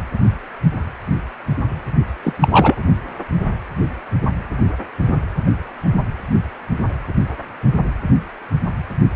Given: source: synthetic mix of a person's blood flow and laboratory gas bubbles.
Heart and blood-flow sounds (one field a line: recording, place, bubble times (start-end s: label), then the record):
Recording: Doppler ultrasound of blood flow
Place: precordium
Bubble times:
2.23-2.33 s: bubbles
2.42-2.75 s: bubbles
From the record:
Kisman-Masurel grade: 213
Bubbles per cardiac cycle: several, 3 to 8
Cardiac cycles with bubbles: 1 to 10%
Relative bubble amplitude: loud (0.450 to 0.775)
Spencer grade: 1 (occasional bubble signal discernible with the cardiac motion signal, with majority of cardiac periods free of bubbles)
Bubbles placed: only in the low amplitude regions of the cardiac cycle